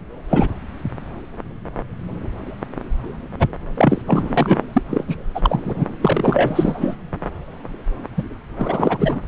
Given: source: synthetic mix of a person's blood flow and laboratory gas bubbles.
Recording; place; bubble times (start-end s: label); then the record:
Doppler ultrasound of blood flow; subclavian vein
0.29-0.48 s: bubbles
3.39-3.48 s: bubbles
3.76-4.01 s: bubbles
4.06-4.58 s: bubbles
4.73-4.82 s: bubbles
4.89-5.04 s: bubbles
5.08-5.15 s: bubbles
5.34-5.86 s: bubbles
6.02-6.97 s: bubbles
8.17-8.23 s: bubbles
8.56-9.20 s: bubbles
From the record:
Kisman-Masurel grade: 333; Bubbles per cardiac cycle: rolling drumbeat, 9 or more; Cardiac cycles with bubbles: 50 to 99%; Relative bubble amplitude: loud (0.450 to 0.775); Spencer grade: 3 (all of the cardiac periods contain showers or single bubble signals, but not dominating or overriding the cardiac motion signals); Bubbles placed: anywhere in the cardiac cycle